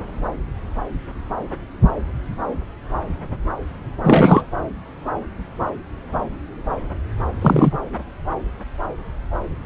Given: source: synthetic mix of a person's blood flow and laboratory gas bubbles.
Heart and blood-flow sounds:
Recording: Doppler ultrasound of blood flow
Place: subclavian vein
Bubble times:
4.03-4.46 s: bubbles
7.40-7.78 s: bubbles
From the record:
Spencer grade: 2 (many but less than half of the cardiac periods contain bubble signals, singularly or in groups)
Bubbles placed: anywhere in the cardiac cycle

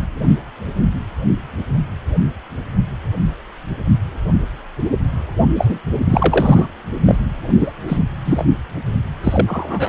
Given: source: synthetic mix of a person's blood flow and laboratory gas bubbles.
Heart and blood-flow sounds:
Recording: Doppler ultrasound of blood flow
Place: precordium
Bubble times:
5.58-5.79 s: bubbles
6.10-6.67 s: bubbles
7.06-7.16 s: bubbles
7.58-7.72 s: bubbles
7.88-7.99 s: bubbles
8.25-8.45 s: bubbles
9.23-9.89 s: bubbles
From the record:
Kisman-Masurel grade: 223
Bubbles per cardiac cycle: several, 3 to 8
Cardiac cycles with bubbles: 10 to 50%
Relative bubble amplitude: loud (0.450 to 0.775)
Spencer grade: 2 (many but less than half of the cardiac periods contain bubble signals, singularly or in groups)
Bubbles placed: only in the low amplitude regions of the cardiac cycle

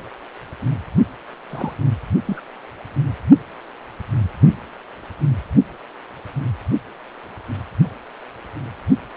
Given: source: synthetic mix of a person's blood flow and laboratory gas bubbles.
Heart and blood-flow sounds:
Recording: Doppler ultrasound of blood flow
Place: precordium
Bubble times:
1.50-1.74 s: bubbles
2.26-2.41 s: bubbles
From the record:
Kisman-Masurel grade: 121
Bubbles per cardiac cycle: 1 to 2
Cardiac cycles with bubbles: 10 to 50%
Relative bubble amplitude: barely perceptible (0.100 to 0.250)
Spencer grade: 2 (many but less than half of the cardiac periods contain bubble signals, singularly or in groups)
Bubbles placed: only in the low amplitude regions of the cardiac cycle

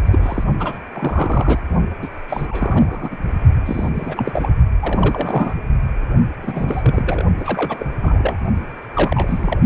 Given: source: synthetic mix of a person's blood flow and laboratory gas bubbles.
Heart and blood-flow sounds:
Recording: Doppler ultrasound of blood flow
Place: precordium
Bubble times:
0.00-0.43 s: bubbles
0.59-0.78 s: bubbles
0.94-1.60 s: bubbles
2.02-2.08 s: bubbles
2.29-2.46 s: bubbles
2.48-3.17 s: bubbles
3.65-3.90 s: bubbles
3.95-4.51 s: bubbles
4.80-5.54 s: bubbles
6.42-7.25 s: bubbles
7.37-7.86 s: bubbles
8.01-8.38 s: bubbles
8.94-9.58 s: bubbles
From the record:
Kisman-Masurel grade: 342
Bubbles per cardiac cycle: rolling drumbeat, 9 or more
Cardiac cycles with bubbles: 100%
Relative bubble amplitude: moderate (0.250 to 0.450)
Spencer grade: 3 (all of the cardiac periods contain showers or single bubble signals, but not dominating or overriding the cardiac motion signals)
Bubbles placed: only in the low amplitude regions of the cardiac cycle

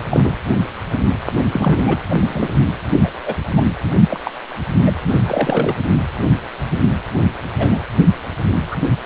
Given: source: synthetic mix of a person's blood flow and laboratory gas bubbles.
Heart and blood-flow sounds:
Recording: Doppler ultrasound of blood flow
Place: precordium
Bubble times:
0.10-0.34 s: bubbles
1.51-1.82 s: bubbles
1.86-1.97 s: bubbles
2.08-2.17 s: bubbles
2.20-2.49 s: bubbles
3.01-3.11 s: bubbles
3.26-3.35 s: bubbles
3.55-3.62 s: bubbles
4.10-4.21 s: bubbles
4.23-4.31 s: bubbles
4.86-4.92 s: bubbles
5.09-5.75 s: bubbles
7.58-7.79 s: bubbles
8.71-8.75 s: bubbles
From the record:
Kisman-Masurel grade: 233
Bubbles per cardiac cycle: several, 3 to 8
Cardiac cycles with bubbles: 50 to 99%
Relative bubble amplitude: loud (0.450 to 0.775)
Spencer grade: 3 (all of the cardiac periods contain showers or single bubble signals, but not dominating or overriding the cardiac motion signals)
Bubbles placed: anywhere in the cardiac cycle

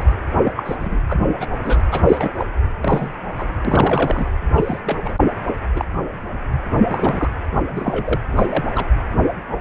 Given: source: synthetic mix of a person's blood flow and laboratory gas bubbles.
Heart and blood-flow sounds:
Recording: Doppler ultrasound of blood flow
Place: precordium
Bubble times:
0.00-0.04 s: bubbles
0.35-0.52 s: bubbles
0.56-0.76 s: bubbles
0.79-1.03 s: bubbles
1.09-1.23 s: bubbles
1.40-1.46 s: bubbles
1.62-1.83 s: bubbles
1.91-2.48 s: bubbles
2.81-3.08 s: bubbles
3.38-3.46 s: bubbles
3.65-4.30 s: bubbles
4.55-4.80 s: bubbles
4.85-4.98 s: bubbles
5.04-5.16 s: bubbles
5.75-5.84 s: bubbles
6.85-7.29 s: bubbles
7.55-7.63 s: bubbles
7.74-8.19 s: bubbles
8.31-8.87 s: bubbles
From the record:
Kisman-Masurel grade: 232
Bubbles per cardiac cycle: several, 3 to 8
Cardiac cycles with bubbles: 50 to 99%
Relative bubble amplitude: moderate (0.250 to 0.450)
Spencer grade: 3 (all of the cardiac periods contain showers or single bubble signals, but not dominating or overriding the cardiac motion signals)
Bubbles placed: anywhere in the cardiac cycle

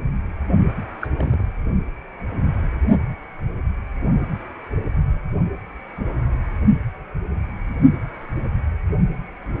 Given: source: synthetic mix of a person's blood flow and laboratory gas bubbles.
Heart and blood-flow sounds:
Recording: Doppler ultrasound of blood flow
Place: precordium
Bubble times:
1.01-1.08 s: bubbles
1.16-1.44 s: bubbles
From the record:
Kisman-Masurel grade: 111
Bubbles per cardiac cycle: 1 to 2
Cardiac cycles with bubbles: 1 to 10%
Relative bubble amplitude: barely perceptible (0.100 to 0.250)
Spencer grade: 1 (occasional bubble signal discernible with the cardiac motion signal, with majority of cardiac periods free of bubbles)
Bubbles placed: only in the low amplitude regions of the cardiac cycle

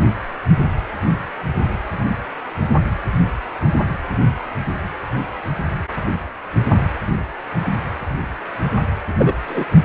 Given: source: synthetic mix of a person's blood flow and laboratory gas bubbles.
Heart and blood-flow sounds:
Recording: Doppler ultrasound of blood flow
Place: precordium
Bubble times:
9.18-9.34 s: bubbles
9.47-9.64 s: bubbles
From the record:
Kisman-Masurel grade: 123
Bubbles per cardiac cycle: 1 to 2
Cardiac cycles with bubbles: 10 to 50%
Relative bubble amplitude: loud (0.450 to 0.775)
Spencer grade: 2 (many but less than half of the cardiac periods contain bubble signals, singularly or in groups)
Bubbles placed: anywhere in the cardiac cycle

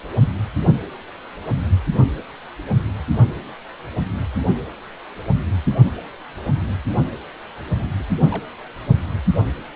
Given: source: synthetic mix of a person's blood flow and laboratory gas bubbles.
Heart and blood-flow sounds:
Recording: Doppler ultrasound of blood flow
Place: precordium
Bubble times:
7.99-8.04 s: bubbles
8.31-8.46 s: bubbles
From the record:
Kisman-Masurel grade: 111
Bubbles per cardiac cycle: 1 to 2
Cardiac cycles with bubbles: 1 to 10%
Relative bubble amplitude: barely perceptible (0.100 to 0.250)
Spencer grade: 1 (occasional bubble signal discernible with the cardiac motion signal, with majority of cardiac periods free of bubbles)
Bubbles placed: only in the low amplitude regions of the cardiac cycle

